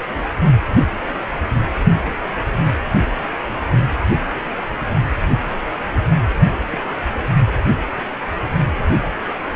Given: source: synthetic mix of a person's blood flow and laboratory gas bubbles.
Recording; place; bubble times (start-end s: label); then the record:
Doppler ultrasound of blood flow; precordium
6.67-6.79 s: bubbles
6.83-6.89 s: bubbles
From the record:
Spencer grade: 1 (occasional bubble signal discernible with the cardiac motion signal, with majority of cardiac periods free of bubbles); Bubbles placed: only in the low amplitude regions of the cardiac cycle